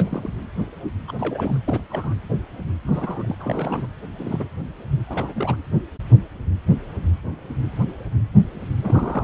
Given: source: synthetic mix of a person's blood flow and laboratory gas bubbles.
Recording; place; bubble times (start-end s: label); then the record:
Doppler ultrasound of blood flow; precordium
0.00-0.29 s: bubbles
1.07-1.12 s: bubbles
1.19-1.58 s: bubbles
1.66-1.83 s: bubbles
1.89-2.14 s: bubbles
2.86-3.34 s: bubbles
3.39-3.86 s: bubbles
4.18-4.48 s: bubbles
5.07-5.56 s: bubbles
8.83-9.24 s: bubbles
From the record:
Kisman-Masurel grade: 221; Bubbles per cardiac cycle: several, 3 to 8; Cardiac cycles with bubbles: 10 to 50%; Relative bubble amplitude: barely perceptible (0.100 to 0.250); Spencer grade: 2 (many but less than half of the cardiac periods contain bubble signals, singularly or in groups); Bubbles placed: anywhere in the cardiac cycle